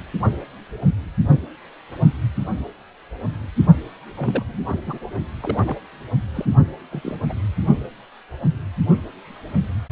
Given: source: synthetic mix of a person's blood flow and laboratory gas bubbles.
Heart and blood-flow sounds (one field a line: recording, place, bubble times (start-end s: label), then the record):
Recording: Doppler ultrasound of blood flow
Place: precordium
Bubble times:
4.16-4.58 s: bubbles
4.69-4.80 s: bubbles
4.87-4.99 s: bubbles
5.42-5.78 s: bubbles
6.33-6.46 s: bubbles
6.91-7.19 s: bubbles
7.29-7.33 s: bubbles
From the record:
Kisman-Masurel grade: 221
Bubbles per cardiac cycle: several, 3 to 8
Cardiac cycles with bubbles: 10 to 50%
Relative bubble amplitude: barely perceptible (0.100 to 0.250)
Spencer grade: 2 (many but less than half of the cardiac periods contain bubble signals, singularly or in groups)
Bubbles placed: only in the low amplitude regions of the cardiac cycle